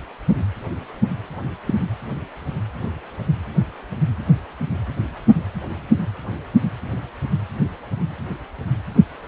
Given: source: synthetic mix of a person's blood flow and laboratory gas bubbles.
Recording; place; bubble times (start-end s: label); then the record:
Doppler ultrasound of blood flow; precordium
1.66-1.74 s: bubbles
From the record:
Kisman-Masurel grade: 112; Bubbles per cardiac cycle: 1 to 2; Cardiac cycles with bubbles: 1 to 10%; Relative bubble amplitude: moderate (0.250 to 0.450); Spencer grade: 1 (occasional bubble signal discernible with the cardiac motion signal, with majority of cardiac periods free of bubbles); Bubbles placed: anywhere in the cardiac cycle